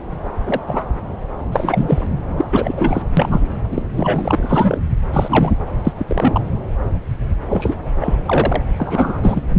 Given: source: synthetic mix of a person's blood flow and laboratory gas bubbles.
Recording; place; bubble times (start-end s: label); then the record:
Doppler ultrasound of blood flow; subclavian vein
0.45-0.59 s: bubbles
0.68-0.84 s: bubbles
1.52-2.07 s: bubbles
2.37-2.46 s: bubbles
2.50-3.02 s: bubbles
3.17-3.42 s: bubbles
3.71-3.82 s: bubbles
3.95-4.81 s: bubbles
5.13-5.52 s: bubbles
5.84-5.94 s: bubbles
5.98-6.41 s: bubbles
7.49-7.76 s: bubbles
8.01-8.13 s: bubbles
8.26-8.62 s: bubbles
8.78-9.21 s: bubbles
9.24-9.43 s: bubbles
From the record:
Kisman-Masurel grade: 233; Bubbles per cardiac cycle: several, 3 to 8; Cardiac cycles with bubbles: 50 to 99%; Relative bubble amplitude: loud (0.450 to 0.775); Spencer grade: 3 (all of the cardiac periods contain showers or single bubble signals, but not dominating or overriding the cardiac motion signals); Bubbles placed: anywhere in the cardiac cycle